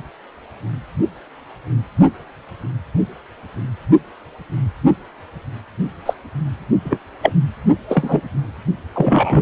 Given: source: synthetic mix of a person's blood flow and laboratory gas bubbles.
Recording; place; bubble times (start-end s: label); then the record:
Doppler ultrasound of blood flow; precordium
6.05-6.13 s: bubbles
6.84-6.98 s: bubbles
7.22-7.32 s: bubbles
7.89-8.20 s: bubbles
8.95-9.42 s: bubbles
From the record:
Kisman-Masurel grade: 123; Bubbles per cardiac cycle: 1 to 2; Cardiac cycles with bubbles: 10 to 50%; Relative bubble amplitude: loud (0.450 to 0.775); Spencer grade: 2 (many but less than half of the cardiac periods contain bubble signals, singularly or in groups); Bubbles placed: only in the low amplitude regions of the cardiac cycle